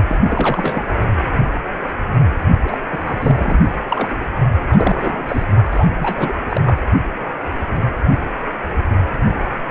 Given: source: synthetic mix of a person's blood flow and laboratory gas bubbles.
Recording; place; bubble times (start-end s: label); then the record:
Doppler ultrasound of blood flow; precordium
0.07-0.17 s: bubbles
0.21-0.85 s: bubbles
2.64-2.78 s: bubbles
2.91-3.59 s: bubbles
3.89-4.08 s: bubbles
4.69-5.23 s: bubbles
5.28-5.45 s: bubbles
5.70-5.87 s: bubbles
6.00-6.33 s: bubbles
6.49-6.78 s: bubbles
6.82-6.86 s: bubbles
From the record:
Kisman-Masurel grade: 332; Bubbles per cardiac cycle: rolling drumbeat, 9 or more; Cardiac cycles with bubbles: 50 to 99%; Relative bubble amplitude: moderate (0.250 to 0.450); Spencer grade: 3 (all of the cardiac periods contain showers or single bubble signals, but not dominating or overriding the cardiac motion signals); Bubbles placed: only in the low amplitude regions of the cardiac cycle